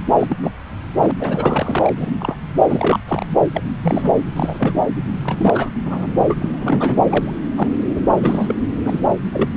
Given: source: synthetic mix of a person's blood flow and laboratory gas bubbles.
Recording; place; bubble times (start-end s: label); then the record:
Doppler ultrasound of blood flow; subclavian vein
0.19-0.36 s: bubbles
0.43-0.51 s: bubbles
0.97-1.11 s: bubbles
1.19-1.92 s: bubbles
1.97-2.12 s: bubbles
2.18-2.36 s: bubbles
2.70-3.00 s: bubbles
3.08-3.25 s: bubbles
3.54-3.63 s: bubbles
3.83-4.12 s: bubbles
4.36-4.71 s: bubbles
5.23-5.71 s: bubbles
5.85-6.07 s: bubbles
6.30-6.99 s: bubbles
7.10-7.33 s: bubbles
7.57-7.68 s: bubbles
7.95-8.01 s: bubbles
8.17-8.54 s: bubbles
8.85-9.00 s: bubbles
9.33-9.49 s: bubbles
From the record:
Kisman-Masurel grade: 242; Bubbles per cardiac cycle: several, 3 to 8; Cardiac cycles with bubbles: 100%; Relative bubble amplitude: moderate (0.250 to 0.450); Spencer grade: 3 (all of the cardiac periods contain showers or single bubble signals, but not dominating or overriding the cardiac motion signals); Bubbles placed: anywhere in the cardiac cycle